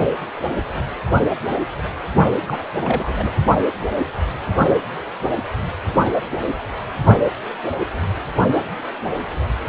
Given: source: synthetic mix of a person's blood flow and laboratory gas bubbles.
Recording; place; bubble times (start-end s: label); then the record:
Doppler ultrasound of blood flow; precordium
2.47-2.57 s: bubbles
2.84-3.31 s: bubbles
From the record:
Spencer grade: 1 (occasional bubble signal discernible with the cardiac motion signal, with majority of cardiac periods free of bubbles); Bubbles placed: only in the low amplitude regions of the cardiac cycle